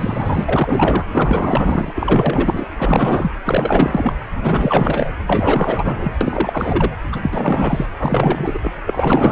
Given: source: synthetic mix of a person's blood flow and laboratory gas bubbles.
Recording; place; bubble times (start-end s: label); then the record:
Doppler ultrasound of blood flow; precordium
0.00-1.06 s: bubbles
1.12-2.67 s: bubbles
2.76-3.30 s: bubbles
3.44-4.13 s: bubbles
4.37-5.14 s: bubbles
5.26-6.12 s: bubbles
6.21-6.91 s: bubbles
7.12-7.86 s: bubbles
7.99-8.60 s: bubbles
8.62-8.71 s: bubbles
8.77-8.80 s: bubbles
8.86-9.32 s: bubbles
From the record:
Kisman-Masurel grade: 444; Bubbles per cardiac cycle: continuous sound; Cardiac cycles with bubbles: 100%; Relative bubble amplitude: maximal (0.775 to 0.999); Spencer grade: 4 (maximum detectable bubble signal sounding continuously throughout systole and diastole of every cardiac period, and overriding the amplitude of the normal cardiac signals); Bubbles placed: anywhere in the cardiac cycle